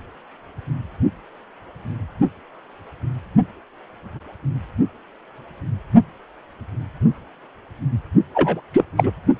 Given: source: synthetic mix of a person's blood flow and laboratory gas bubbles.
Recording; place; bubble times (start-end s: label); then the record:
Doppler ultrasound of blood flow; precordium
8.35-8.61 s: bubbles
8.73-8.84 s: bubbles
8.97-9.12 s: bubbles
From the record:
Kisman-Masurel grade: 223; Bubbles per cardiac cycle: several, 3 to 8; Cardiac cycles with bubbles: 10 to 50%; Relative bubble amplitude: loud (0.450 to 0.775); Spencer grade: 2 (many but less than half of the cardiac periods contain bubble signals, singularly or in groups); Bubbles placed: only in the low amplitude regions of the cardiac cycle